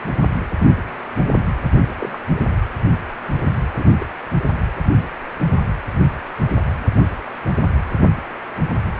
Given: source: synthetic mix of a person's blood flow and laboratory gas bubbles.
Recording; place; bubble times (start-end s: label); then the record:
Doppler ultrasound of blood flow; precordium
1.99-2.17 s: bubbles
3.78-3.83 s: bubbles
4.00-4.06 s: bubbles
From the record:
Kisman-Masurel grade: 122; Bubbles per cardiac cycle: 1 to 2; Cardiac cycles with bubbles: 10 to 50%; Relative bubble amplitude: moderate (0.250 to 0.450); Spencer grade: 2 (many but less than half of the cardiac periods contain bubble signals, singularly or in groups); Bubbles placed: anywhere in the cardiac cycle